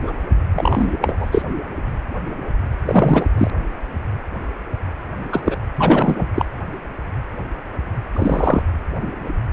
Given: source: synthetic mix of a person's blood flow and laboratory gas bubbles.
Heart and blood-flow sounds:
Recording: Doppler ultrasound of blood flow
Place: precordium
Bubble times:
0.02-0.12 s: bubbles
0.53-0.96 s: bubbles
1.01-1.43 s: bubbles
2.85-3.26 s: bubbles
3.38-3.51 s: bubbles
5.32-5.42 s: bubbles
5.44-5.56 s: bubbles
5.75-6.28 s: bubbles
6.35-6.45 s: bubbles
8.12-8.62 s: bubbles
From the record:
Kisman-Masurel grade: 223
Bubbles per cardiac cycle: several, 3 to 8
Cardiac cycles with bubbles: 10 to 50%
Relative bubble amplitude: loud (0.450 to 0.775)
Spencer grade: 2 (many but less than half of the cardiac periods contain bubble signals, singularly or in groups)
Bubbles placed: anywhere in the cardiac cycle

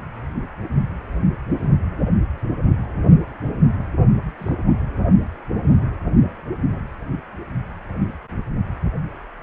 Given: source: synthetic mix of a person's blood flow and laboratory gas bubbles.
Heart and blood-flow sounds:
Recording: Doppler ultrasound of blood flow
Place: precordium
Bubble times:
1.61-1.76 s: bubbles
4.38-4.53 s: bubbles
From the record:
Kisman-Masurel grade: 121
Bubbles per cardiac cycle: 1 to 2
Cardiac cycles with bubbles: 10 to 50%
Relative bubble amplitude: barely perceptible (0.100 to 0.250)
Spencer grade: 2 (many but less than half of the cardiac periods contain bubble signals, singularly or in groups)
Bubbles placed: only in the low amplitude regions of the cardiac cycle

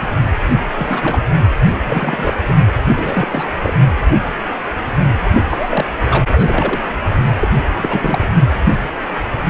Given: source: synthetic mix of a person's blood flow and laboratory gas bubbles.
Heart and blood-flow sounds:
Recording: Doppler ultrasound of blood flow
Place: precordium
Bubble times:
0.00-0.08 s: bubbles
0.75-1.22 s: bubbles
1.85-2.33 s: bubbles
2.47-2.73 s: bubbles
2.96-3.52 s: bubbles
3.62-3.74 s: bubbles
5.33-5.44 s: bubbles
5.48-5.87 s: bubbles
6.04-6.25 s: bubbles
6.32-6.82 s: bubbles
7.40-7.48 s: bubbles
7.77-8.29 s: bubbles
From the record:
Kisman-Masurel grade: 332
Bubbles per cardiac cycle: rolling drumbeat, 9 or more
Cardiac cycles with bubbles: 50 to 99%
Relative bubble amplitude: moderate (0.250 to 0.450)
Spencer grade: 3 (all of the cardiac periods contain showers or single bubble signals, but not dominating or overriding the cardiac motion signals)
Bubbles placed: only in the low amplitude regions of the cardiac cycle

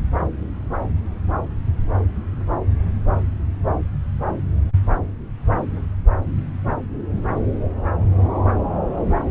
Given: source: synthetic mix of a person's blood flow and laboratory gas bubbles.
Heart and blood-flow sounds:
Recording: Doppler ultrasound of blood flow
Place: subclavian vein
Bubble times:
no bubbles
From the record:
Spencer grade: 0 (complete lack of bubble signals)

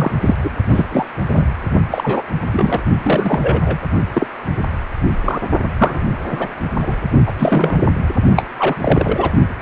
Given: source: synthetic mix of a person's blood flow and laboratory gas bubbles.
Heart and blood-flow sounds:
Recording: Doppler ultrasound of blood flow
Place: precordium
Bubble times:
0.00-0.12 s: bubbles
0.23-0.36 s: bubbles
0.43-0.49 s: bubbles
0.69-0.84 s: bubbles
0.92-1.06 s: bubbles
1.27-1.48 s: bubbles
1.91-2.22 s: bubbles
2.52-2.83 s: bubbles
3.02-3.77 s: bubbles
4.13-4.27 s: bubbles
4.57-4.63 s: bubbles
5.25-5.41 s: bubbles
5.78-6.05 s: bubbles
6.31-6.49 s: bubbles
6.81-6.96 s: bubbles
7.27-7.33 s: bubbles
7.38-7.78 s: bubbles
8.36-8.45 s: bubbles
8.59-8.76 s: bubbles
8.80-9.32 s: bubbles
From the record:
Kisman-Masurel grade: 243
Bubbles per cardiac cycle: several, 3 to 8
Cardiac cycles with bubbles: 100%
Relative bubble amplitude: loud (0.450 to 0.775)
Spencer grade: 3 (all of the cardiac periods contain showers or single bubble signals, but not dominating or overriding the cardiac motion signals)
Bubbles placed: only in the low amplitude regions of the cardiac cycle

